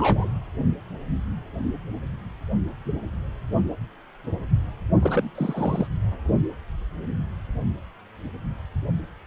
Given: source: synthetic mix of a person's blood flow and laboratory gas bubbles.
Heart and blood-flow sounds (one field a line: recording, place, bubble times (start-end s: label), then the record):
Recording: Doppler ultrasound of blood flow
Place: precordium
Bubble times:
0.00-0.29 s: bubbles
5.01-5.30 s: bubbles
5.35-5.87 s: bubbles
From the record:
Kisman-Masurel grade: 222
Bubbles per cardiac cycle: several, 3 to 8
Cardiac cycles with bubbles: 10 to 50%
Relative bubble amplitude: moderate (0.250 to 0.450)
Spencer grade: 2 (many but less than half of the cardiac periods contain bubble signals, singularly or in groups)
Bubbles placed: only in the low amplitude regions of the cardiac cycle